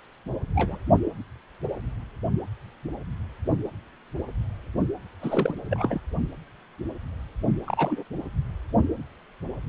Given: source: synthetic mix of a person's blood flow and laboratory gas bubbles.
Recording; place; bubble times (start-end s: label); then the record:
Doppler ultrasound of blood flow; precordium
0.46-0.78 s: bubbles
5.21-5.54 s: bubbles
5.70-6.00 s: bubbles
7.60-8.04 s: bubbles
From the record:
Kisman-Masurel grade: 222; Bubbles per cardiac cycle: several, 3 to 8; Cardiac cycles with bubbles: 10 to 50%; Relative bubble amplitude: moderate (0.250 to 0.450); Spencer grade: 2 (many but less than half of the cardiac periods contain bubble signals, singularly or in groups); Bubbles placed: only in the low amplitude regions of the cardiac cycle